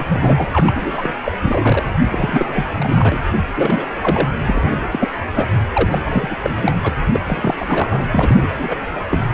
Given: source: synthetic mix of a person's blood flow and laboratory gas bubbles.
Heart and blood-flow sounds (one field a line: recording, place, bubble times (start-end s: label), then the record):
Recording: Doppler ultrasound of blood flow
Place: precordium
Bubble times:
0.00-0.05 s: bubbles
0.08-0.47 s: bubbles
0.53-1.16 s: bubbles
1.24-1.38 s: bubbles
1.42-1.83 s: bubbles
2.09-3.19 s: bubbles
3.54-3.85 s: bubbles
4.01-4.29 s: bubbles
4.46-4.88 s: bubbles
4.91-5.09 s: bubbles
5.35-5.46 s: bubbles
5.72-5.99 s: bubbles
6.04-6.37 s: bubbles
6.42-6.72 s: bubbles
6.83-6.94 s: bubbles
7.12-7.20 s: bubbles
7.26-7.54 s: bubbles
7.59-8.05 s: bubbles
8.12-8.47 s: bubbles
8.57-8.79 s: bubbles
8.95-9.01 s: bubbles
9.09-9.19 s: bubbles
From the record:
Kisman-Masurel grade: 342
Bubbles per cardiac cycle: rolling drumbeat, 9 or more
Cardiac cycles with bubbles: 100%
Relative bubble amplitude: moderate (0.250 to 0.450)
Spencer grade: 3 (all of the cardiac periods contain showers or single bubble signals, but not dominating or overriding the cardiac motion signals)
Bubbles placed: anywhere in the cardiac cycle